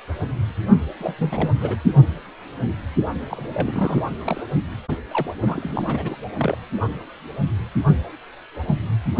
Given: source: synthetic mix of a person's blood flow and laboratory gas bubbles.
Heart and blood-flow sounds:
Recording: Doppler ultrasound of blood flow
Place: precordium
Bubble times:
0.99-1.16 s: bubbles
1.18-1.53 s: bubbles
1.60-1.76 s: bubbles
3.30-4.03 s: bubbles
4.17-4.50 s: bubbles
5.11-5.33 s: bubbles
5.40-6.15 s: bubbles
6.36-6.55 s: bubbles
From the record:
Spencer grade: 3 (all of the cardiac periods contain showers or single bubble signals, but not dominating or overriding the cardiac motion signals)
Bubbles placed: only in the low amplitude regions of the cardiac cycle

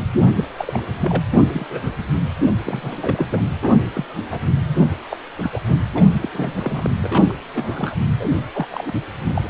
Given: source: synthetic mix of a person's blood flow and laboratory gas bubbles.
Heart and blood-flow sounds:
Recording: Doppler ultrasound of blood flow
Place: precordium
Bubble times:
0.36-0.51 s: bubbles
0.57-0.83 s: bubbles
1.01-1.21 s: bubbles
1.32-1.37 s: bubbles
1.52-1.67 s: bubbles
1.69-1.92 s: bubbles
2.42-2.52 s: bubbles
2.64-3.27 s: bubbles
3.30-3.43 s: bubbles
3.62-3.78 s: bubbles
3.93-4.04 s: bubbles
4.31-4.40 s: bubbles
5.10-5.17 s: bubbles
5.38-5.60 s: bubbles
5.67-5.77 s: bubbles
5.94-6.03 s: bubbles
6.21-6.29 s: bubbles
6.33-6.90 s: bubbles
7.00-7.35 s: bubbles
7.53-7.96 s: bubbles
8.20-8.29 s: bubbles
8.54-8.67 s: bubbles
8.71-8.91 s: bubbles
9.29-9.48 s: bubbles
From the record:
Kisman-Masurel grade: 232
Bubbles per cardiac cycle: several, 3 to 8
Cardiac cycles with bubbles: 50 to 99%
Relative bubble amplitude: moderate (0.250 to 0.450)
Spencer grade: 3 (all of the cardiac periods contain showers or single bubble signals, but not dominating or overriding the cardiac motion signals)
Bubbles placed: anywhere in the cardiac cycle

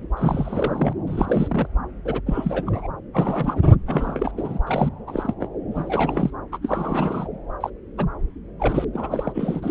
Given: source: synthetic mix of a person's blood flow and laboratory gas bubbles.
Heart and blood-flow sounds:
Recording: Doppler ultrasound of blood flow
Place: subclavian vein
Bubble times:
0.16-0.93 s: bubbles
1.06-1.67 s: bubbles
2.05-2.21 s: bubbles
2.26-2.88 s: bubbles
3.12-3.61 s: bubbles
3.72-3.76 s: bubbles
3.86-4.31 s: bubbles
4.37-4.59 s: bubbles
4.67-4.89 s: bubbles
5.07-5.34 s: bubbles
5.40-5.48 s: bubbles
5.71-6.30 s: bubbles
6.52-6.58 s: bubbles
6.62-7.28 s: bubbles
7.60-7.70 s: bubbles
7.98-8.06 s: bubbles
8.60-8.85 s: bubbles
8.94-9.71 s: bubbles
From the record:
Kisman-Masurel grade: 332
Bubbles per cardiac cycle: rolling drumbeat, 9 or more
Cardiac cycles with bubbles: 50 to 99%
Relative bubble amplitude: moderate (0.250 to 0.450)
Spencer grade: 3 (all of the cardiac periods contain showers or single bubble signals, but not dominating or overriding the cardiac motion signals)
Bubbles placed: anywhere in the cardiac cycle

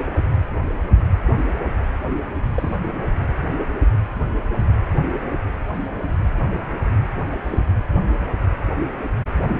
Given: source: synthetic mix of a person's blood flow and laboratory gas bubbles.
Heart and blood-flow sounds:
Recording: Doppler ultrasound of blood flow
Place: precordium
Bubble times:
2.55-2.77 s: bubbles
7.25-7.37 s: bubbles
7.44-7.60 s: bubbles
From the record:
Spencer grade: 2 (many but less than half of the cardiac periods contain bubble signals, singularly or in groups)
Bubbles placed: anywhere in the cardiac cycle

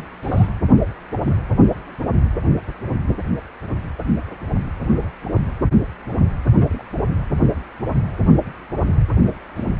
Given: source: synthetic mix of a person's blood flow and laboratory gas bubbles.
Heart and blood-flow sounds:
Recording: Doppler ultrasound of blood flow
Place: precordium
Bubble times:
0.22-0.47 s: bubbles
1.21-1.34 s: bubbles
4.81-5.09 s: bubbles
5.32-5.41 s: bubbles
6.15-6.25 s: bubbles
6.57-6.84 s: bubbles
9.24-9.37 s: bubbles
9.56-9.65 s: bubbles
From the record:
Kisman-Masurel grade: 121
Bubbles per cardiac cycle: 1 to 2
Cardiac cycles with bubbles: 10 to 50%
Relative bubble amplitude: barely perceptible (0.100 to 0.250)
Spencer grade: 2 (many but less than half of the cardiac periods contain bubble signals, singularly or in groups)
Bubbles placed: anywhere in the cardiac cycle

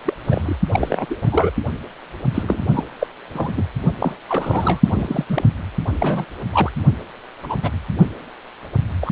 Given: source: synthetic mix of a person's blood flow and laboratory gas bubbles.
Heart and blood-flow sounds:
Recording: Doppler ultrasound of blood flow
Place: precordium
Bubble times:
0.05-0.14 s: bubbles
0.25-0.56 s: bubbles
0.73-1.06 s: bubbles
1.09-1.50 s: bubbles
2.34-2.62 s: bubbles
2.73-2.84 s: bubbles
2.99-3.07 s: bubbles
3.33-3.54 s: bubbles
3.56-3.65 s: bubbles
4.00-4.15 s: bubbles
4.29-4.80 s: bubbles
4.84-5.25 s: bubbles
5.29-5.45 s: bubbles
5.99-6.25 s: bubbles
6.53-6.71 s: bubbles
7.42-7.55 s: bubbles
7.62-7.71 s: bubbles
9.00-9.12 s: bubbles
From the record:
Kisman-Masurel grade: 242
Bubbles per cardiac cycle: several, 3 to 8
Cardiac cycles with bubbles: 100%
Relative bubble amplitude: moderate (0.250 to 0.450)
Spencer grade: 3 (all of the cardiac periods contain showers or single bubble signals, but not dominating or overriding the cardiac motion signals)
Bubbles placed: only in the low amplitude regions of the cardiac cycle

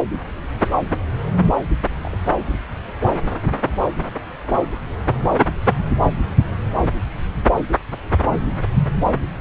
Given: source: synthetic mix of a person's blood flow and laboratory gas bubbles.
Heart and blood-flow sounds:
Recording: Doppler ultrasound of blood flow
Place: subclavian vein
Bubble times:
2.02-2.17 s: bubbles
From the record:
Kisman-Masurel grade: 111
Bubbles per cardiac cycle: 1 to 2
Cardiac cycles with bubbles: 1 to 10%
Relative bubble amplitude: barely perceptible (0.100 to 0.250)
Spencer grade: 1 (occasional bubble signal discernible with the cardiac motion signal, with majority of cardiac periods free of bubbles)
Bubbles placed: anywhere in the cardiac cycle

